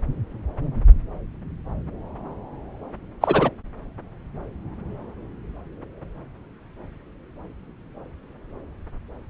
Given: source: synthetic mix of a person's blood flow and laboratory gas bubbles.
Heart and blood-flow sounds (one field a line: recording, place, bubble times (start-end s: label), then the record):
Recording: Doppler ultrasound of blood flow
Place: subclavian vein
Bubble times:
3.21-3.51 s: bubbles
From the record:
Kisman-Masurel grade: 113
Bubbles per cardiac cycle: 1 to 2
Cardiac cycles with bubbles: 1 to 10%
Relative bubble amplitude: loud (0.450 to 0.775)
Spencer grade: 1 (occasional bubble signal discernible with the cardiac motion signal, with majority of cardiac periods free of bubbles)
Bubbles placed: anywhere in the cardiac cycle